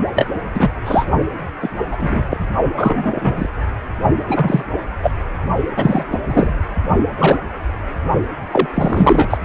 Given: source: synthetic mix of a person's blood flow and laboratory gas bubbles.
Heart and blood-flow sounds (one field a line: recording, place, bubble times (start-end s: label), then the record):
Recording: Doppler ultrasound of blood flow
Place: precordium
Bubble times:
0.15-0.26 s: bubbles
0.54-0.69 s: bubbles
0.85-1.06 s: bubbles
1.61-1.70 s: bubbles
1.91-2.23 s: bubbles
2.30-2.38 s: bubbles
2.77-3.51 s: bubbles
4.28-4.63 s: bubbles
5.02-5.12 s: bubbles
5.76-6.05 s: bubbles
6.12-6.18 s: bubbles
6.25-6.54 s: bubbles
7.18-7.37 s: bubbles
8.52-8.68 s: bubbles
8.74-9.38 s: bubbles
From the record:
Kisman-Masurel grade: 243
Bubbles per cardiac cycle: several, 3 to 8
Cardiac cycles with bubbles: 100%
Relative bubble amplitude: loud (0.450 to 0.775)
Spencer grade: 3 (all of the cardiac periods contain showers or single bubble signals, but not dominating or overriding the cardiac motion signals)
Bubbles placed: only in the low amplitude regions of the cardiac cycle